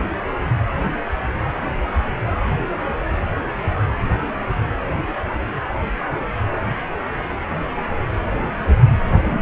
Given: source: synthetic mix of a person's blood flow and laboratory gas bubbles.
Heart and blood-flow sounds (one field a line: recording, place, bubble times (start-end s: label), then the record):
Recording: Doppler ultrasound of blood flow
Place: precordium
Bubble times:
9.23-9.42 s: bubbles
From the record:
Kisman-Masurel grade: 112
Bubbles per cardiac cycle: 1 to 2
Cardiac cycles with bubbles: 1 to 10%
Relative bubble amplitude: moderate (0.250 to 0.450)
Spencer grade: 1 (occasional bubble signal discernible with the cardiac motion signal, with majority of cardiac periods free of bubbles)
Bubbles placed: anywhere in the cardiac cycle